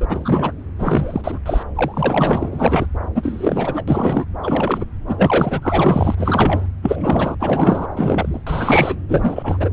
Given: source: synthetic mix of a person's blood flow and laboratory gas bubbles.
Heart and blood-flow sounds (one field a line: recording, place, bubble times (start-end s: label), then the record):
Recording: Doppler ultrasound of blood flow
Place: subclavian vein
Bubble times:
0.00-0.07 s: bubbles
0.10-0.53 s: bubbles
0.78-1.40 s: bubbles
1.46-1.63 s: bubbles
1.75-2.87 s: bubbles
3.15-3.83 s: bubbles
3.88-4.25 s: bubbles
4.42-4.85 s: bubbles
5.07-6.67 s: bubbles
6.83-7.35 s: bubbles
7.39-7.87 s: bubbles
7.96-8.40 s: bubbles
8.46-8.97 s: bubbles
9.08-9.71 s: bubbles
From the record:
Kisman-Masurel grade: 343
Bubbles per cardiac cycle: rolling drumbeat, 9 or more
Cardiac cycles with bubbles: 100%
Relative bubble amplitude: loud (0.450 to 0.775)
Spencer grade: 3 (all of the cardiac periods contain showers or single bubble signals, but not dominating or overriding the cardiac motion signals)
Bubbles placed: anywhere in the cardiac cycle